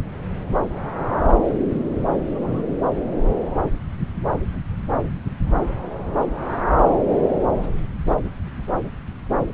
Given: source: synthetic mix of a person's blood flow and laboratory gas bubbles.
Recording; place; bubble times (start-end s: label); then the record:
Doppler ultrasound of blood flow; subclavian vein
2.29-2.69 s: bubbles
From the record:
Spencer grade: 1 (occasional bubble signal discernible with the cardiac motion signal, with majority of cardiac periods free of bubbles); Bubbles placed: anywhere in the cardiac cycle